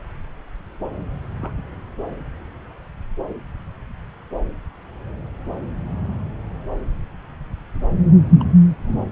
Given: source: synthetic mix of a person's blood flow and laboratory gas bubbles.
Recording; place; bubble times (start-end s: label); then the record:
Doppler ultrasound of blood flow; subclavian vein
1.36-1.53 s: bubbles
8.40-8.45 s: bubbles
8.88-9.05 s: bubbles
From the record:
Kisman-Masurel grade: 121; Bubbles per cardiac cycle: 1 to 2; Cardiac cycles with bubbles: 10 to 50%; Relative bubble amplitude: barely perceptible (0.100 to 0.250); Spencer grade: 2 (many but less than half of the cardiac periods contain bubble signals, singularly or in groups); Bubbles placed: anywhere in the cardiac cycle